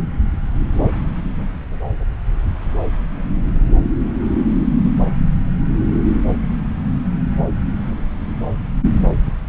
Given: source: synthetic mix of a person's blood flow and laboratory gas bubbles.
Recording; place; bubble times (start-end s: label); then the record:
Doppler ultrasound of blood flow; subclavian vein
no bubbles
From the record:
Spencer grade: 0 (complete lack of bubble signals)